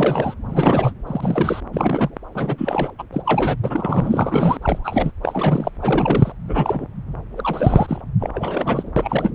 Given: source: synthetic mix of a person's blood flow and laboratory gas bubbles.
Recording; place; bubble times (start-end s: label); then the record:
Doppler ultrasound of blood flow; subclavian vein
0.00-0.34 s: bubbles
0.48-0.93 s: bubbles
1.07-1.60 s: bubbles
1.73-2.10 s: bubbles
2.34-2.90 s: bubbles
2.98-3.04 s: bubbles
3.12-3.22 s: bubbles
3.25-3.56 s: bubbles
3.64-5.11 s: bubbles
5.22-5.69 s: bubbles
5.81-6.32 s: bubbles
6.47-6.86 s: bubbles
7.36-8.01 s: bubbles
8.20-8.30 s: bubbles
8.33-8.90 s: bubbles
8.96-9.30 s: bubbles
From the record:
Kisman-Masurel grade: 342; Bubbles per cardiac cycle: rolling drumbeat, 9 or more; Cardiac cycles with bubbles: 100%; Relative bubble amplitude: moderate (0.250 to 0.450); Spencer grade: 3 (all of the cardiac periods contain showers or single bubble signals, but not dominating or overriding the cardiac motion signals); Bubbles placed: anywhere in the cardiac cycle